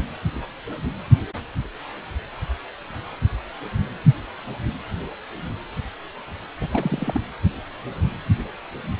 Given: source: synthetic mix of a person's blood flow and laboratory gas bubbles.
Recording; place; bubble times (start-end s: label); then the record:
Doppler ultrasound of blood flow; precordium
6.60-6.68 s: bubbles
6.72-7.21 s: bubbles
From the record:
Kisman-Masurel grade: 211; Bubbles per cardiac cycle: several, 3 to 8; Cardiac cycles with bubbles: 1 to 10%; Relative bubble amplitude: barely perceptible (0.100 to 0.250); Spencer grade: 1 (occasional bubble signal discernible with the cardiac motion signal, with majority of cardiac periods free of bubbles); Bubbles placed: anywhere in the cardiac cycle